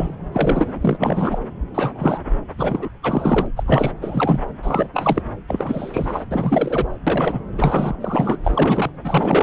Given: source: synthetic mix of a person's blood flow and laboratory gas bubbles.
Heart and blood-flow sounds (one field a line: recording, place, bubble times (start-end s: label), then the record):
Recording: Doppler ultrasound of blood flow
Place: subclavian vein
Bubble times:
0.00-0.17 s: bubbles
0.33-0.97 s: bubbles
0.99-1.39 s: bubbles
1.74-2.21 s: bubbles
2.58-2.90 s: bubbles
3.02-3.46 s: bubbles
3.56-3.93 s: bubbles
4.02-4.41 s: bubbles
4.62-4.89 s: bubbles
4.94-5.22 s: bubbles
5.47-6.24 s: bubbles
6.31-6.97 s: bubbles
7.06-7.41 s: bubbles
7.57-7.96 s: bubbles
8.00-8.38 s: bubbles
8.43-8.91 s: bubbles
9.04-9.43 s: bubbles
From the record:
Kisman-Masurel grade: 343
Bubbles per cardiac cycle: rolling drumbeat, 9 or more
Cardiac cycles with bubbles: 100%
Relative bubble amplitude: loud (0.450 to 0.775)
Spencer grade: 3 (all of the cardiac periods contain showers or single bubble signals, but not dominating or overriding the cardiac motion signals)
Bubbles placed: anywhere in the cardiac cycle